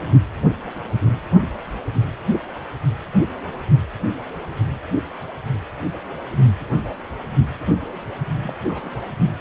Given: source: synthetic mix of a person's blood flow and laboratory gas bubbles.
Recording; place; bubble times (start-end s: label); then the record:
Doppler ultrasound of blood flow; precordium
8.42-8.57 s: bubbles
8.68-9.15 s: bubbles
From the record:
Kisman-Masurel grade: 211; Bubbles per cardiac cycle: several, 3 to 8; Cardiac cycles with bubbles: 1 to 10%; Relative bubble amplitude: barely perceptible (0.100 to 0.250); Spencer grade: 1 (occasional bubble signal discernible with the cardiac motion signal, with majority of cardiac periods free of bubbles); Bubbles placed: only in the low amplitude regions of the cardiac cycle